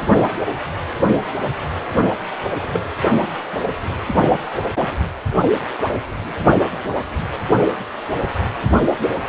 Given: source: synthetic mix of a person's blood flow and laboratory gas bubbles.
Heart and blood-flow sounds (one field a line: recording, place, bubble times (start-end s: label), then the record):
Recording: Doppler ultrasound of blood flow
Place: precordium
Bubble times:
2.60-2.85 s: bubbles
From the record:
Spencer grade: 2 (many but less than half of the cardiac periods contain bubble signals, singularly or in groups)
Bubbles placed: only in the low amplitude regions of the cardiac cycle